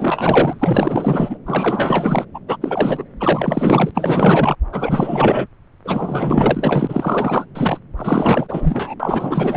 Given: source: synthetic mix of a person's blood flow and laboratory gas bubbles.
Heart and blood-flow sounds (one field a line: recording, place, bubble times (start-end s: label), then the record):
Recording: Doppler ultrasound of blood flow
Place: subclavian vein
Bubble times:
0.00-1.38 s: bubbles
1.46-2.25 s: bubbles
2.34-2.40 s: bubbles
2.48-2.57 s: bubbles
2.61-3.04 s: bubbles
3.19-3.91 s: bubbles
3.94-4.55 s: bubbles
4.72-5.48 s: bubbles
5.84-7.46 s: bubbles
7.55-7.80 s: bubbles
7.98-8.95 s: bubbles
8.99-9.56 s: bubbles
From the record:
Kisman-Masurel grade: 444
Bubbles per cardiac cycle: continuous sound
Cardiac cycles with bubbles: 100%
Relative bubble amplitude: maximal (0.775 to 0.999)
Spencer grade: 4 (maximum detectable bubble signal sounding continuously throughout systole and diastole of every cardiac period, and overriding the amplitude of the normal cardiac signals)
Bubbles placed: anywhere in the cardiac cycle